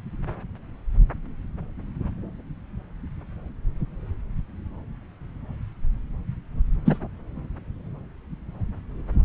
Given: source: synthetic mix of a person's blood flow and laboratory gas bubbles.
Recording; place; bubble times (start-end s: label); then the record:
Doppler ultrasound of blood flow; subclavian vein
6.86-6.98 s: bubbles
From the record:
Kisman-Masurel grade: 123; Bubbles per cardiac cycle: 1 to 2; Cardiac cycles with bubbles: 10 to 50%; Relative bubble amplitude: loud (0.450 to 0.775); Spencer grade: 2 (many but less than half of the cardiac periods contain bubble signals, singularly or in groups); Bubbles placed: anywhere in the cardiac cycle